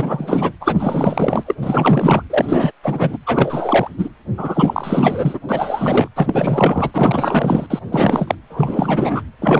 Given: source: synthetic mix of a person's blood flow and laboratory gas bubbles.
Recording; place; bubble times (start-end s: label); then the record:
Doppler ultrasound of blood flow; precordium
0.00-0.53 s: bubbles
0.60-1.55 s: bubbles
1.61-2.22 s: bubbles
2.29-2.71 s: bubbles
2.83-3.18 s: bubbles
3.26-3.88 s: bubbles
3.98-4.08 s: bubbles
4.37-5.40 s: bubbles
5.48-6.08 s: bubbles
6.16-6.91 s: bubbles
6.93-7.67 s: bubbles
7.70-7.79 s: bubbles
7.91-8.35 s: bubbles
8.49-9.24 s: bubbles
9.41-9.59 s: bubbles
From the record:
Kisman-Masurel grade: 444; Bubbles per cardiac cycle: continuous sound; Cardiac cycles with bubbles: 100%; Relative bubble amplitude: maximal (0.775 to 0.999); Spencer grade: 4 (maximum detectable bubble signal sounding continuously throughout systole and diastole of every cardiac period, and overriding the amplitude of the normal cardiac signals); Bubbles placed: anywhere in the cardiac cycle